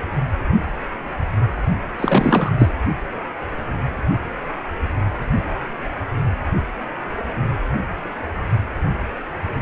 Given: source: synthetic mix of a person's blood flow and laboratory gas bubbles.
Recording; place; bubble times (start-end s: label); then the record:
Doppler ultrasound of blood flow; precordium
1.98-2.51 s: bubbles
2.58-2.73 s: bubbles
From the record:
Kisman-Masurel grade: 213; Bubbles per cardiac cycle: several, 3 to 8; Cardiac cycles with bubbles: 1 to 10%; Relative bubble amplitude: loud (0.450 to 0.775); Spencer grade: 1 (occasional bubble signal discernible with the cardiac motion signal, with majority of cardiac periods free of bubbles); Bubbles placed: anywhere in the cardiac cycle